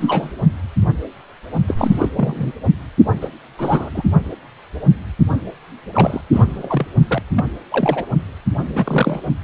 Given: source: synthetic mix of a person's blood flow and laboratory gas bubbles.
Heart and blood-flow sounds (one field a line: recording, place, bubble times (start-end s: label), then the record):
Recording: Doppler ultrasound of blood flow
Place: precordium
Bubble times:
0.00-0.33 s: bubbles
1.67-2.08 s: bubbles
2.17-2.52 s: bubbles
3.21-3.29 s: bubbles
3.59-4.03 s: bubbles
5.93-6.21 s: bubbles
6.33-6.86 s: bubbles
7.08-7.22 s: bubbles
7.35-7.46 s: bubbles
7.72-8.05 s: bubbles
8.75-9.21 s: bubbles
From the record:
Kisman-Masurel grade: 232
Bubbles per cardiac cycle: several, 3 to 8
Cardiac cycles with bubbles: 50 to 99%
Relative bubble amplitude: moderate (0.250 to 0.450)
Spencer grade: 3 (all of the cardiac periods contain showers or single bubble signals, but not dominating or overriding the cardiac motion signals)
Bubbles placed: only in the low amplitude regions of the cardiac cycle